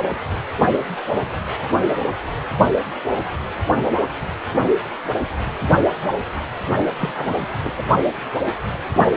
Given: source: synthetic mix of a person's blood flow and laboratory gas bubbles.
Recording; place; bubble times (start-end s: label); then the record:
Doppler ultrasound of blood flow; precordium
6.97-7.46 s: bubbles
7.63-7.83 s: bubbles
From the record:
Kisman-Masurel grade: 212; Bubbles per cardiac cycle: several, 3 to 8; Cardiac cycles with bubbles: 1 to 10%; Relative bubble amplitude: moderate (0.250 to 0.450); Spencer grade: 1 (occasional bubble signal discernible with the cardiac motion signal, with majority of cardiac periods free of bubbles); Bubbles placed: only in the low amplitude regions of the cardiac cycle